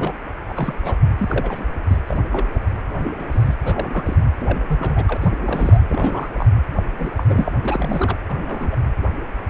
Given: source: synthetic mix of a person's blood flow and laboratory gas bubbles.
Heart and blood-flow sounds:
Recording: Doppler ultrasound of blood flow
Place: precordium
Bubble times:
0.00-0.12 s: bubbles
0.49-0.53 s: bubbles
0.56-0.74 s: bubbles
0.84-0.95 s: bubbles
1.17-1.65 s: bubbles
1.90-1.98 s: bubbles
2.08-2.18 s: bubbles
2.29-2.51 s: bubbles
3.04-3.12 s: bubbles
3.19-3.25 s: bubbles
3.31-3.54 s: bubbles
3.65-4.17 s: bubbles
4.40-5.17 s: bubbles
5.21-5.32 s: bubbles
5.45-5.87 s: bubbles
5.90-6.29 s: bubbles
6.37-6.47 s: bubbles
6.76-6.83 s: bubbles
6.98-7.11 s: bubbles
7.16-7.24 s: bubbles
7.28-7.50 s: bubbles
7.64-8.16 s: bubbles
8.28-8.75 s: bubbles
From the record:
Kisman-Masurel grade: 232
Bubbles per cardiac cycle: several, 3 to 8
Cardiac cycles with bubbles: 50 to 99%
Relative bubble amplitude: moderate (0.250 to 0.450)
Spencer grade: 3 (all of the cardiac periods contain showers or single bubble signals, but not dominating or overriding the cardiac motion signals)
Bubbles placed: anywhere in the cardiac cycle

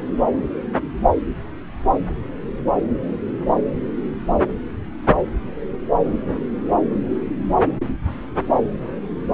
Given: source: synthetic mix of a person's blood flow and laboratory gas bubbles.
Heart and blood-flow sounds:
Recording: Doppler ultrasound of blood flow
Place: subclavian vein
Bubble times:
no bubbles
From the record:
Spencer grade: 0 (complete lack of bubble signals)

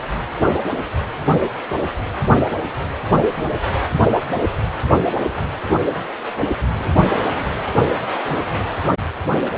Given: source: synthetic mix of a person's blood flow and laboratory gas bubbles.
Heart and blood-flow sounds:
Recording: Doppler ultrasound of blood flow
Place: precordium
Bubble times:
no bubbles
From the record:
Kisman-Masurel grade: 000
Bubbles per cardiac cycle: 0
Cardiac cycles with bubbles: 0%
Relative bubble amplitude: no bubbles discernible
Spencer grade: 0 (complete lack of bubble signals)

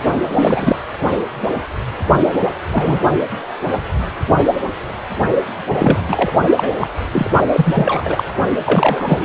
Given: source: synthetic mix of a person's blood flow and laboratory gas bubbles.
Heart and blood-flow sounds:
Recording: Doppler ultrasound of blood flow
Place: precordium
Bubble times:
0.27-0.76 s: bubbles
2.40-2.48 s: bubbles
2.71-2.99 s: bubbles
5.79-5.99 s: bubbles
6.08-6.33 s: bubbles
6.57-6.69 s: bubbles
6.80-6.88 s: bubbles
7.12-7.30 s: bubbles
7.53-8.23 s: bubbles
8.64-9.25 s: bubbles
From the record:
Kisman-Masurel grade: 233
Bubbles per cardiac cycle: several, 3 to 8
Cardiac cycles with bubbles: 50 to 99%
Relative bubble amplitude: loud (0.450 to 0.775)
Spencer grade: 3 (all of the cardiac periods contain showers or single bubble signals, but not dominating or overriding the cardiac motion signals)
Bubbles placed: only in the low amplitude regions of the cardiac cycle

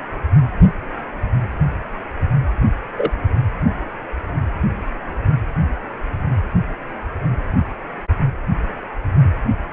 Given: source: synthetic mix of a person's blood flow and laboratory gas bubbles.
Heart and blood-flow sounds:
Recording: Doppler ultrasound of blood flow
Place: precordium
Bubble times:
2.97-3.10 s: bubbles
From the record:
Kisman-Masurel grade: 112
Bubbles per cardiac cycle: 1 to 2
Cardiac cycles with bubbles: 1 to 10%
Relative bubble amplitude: moderate (0.250 to 0.450)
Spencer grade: 1 (occasional bubble signal discernible with the cardiac motion signal, with majority of cardiac periods free of bubbles)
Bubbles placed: anywhere in the cardiac cycle

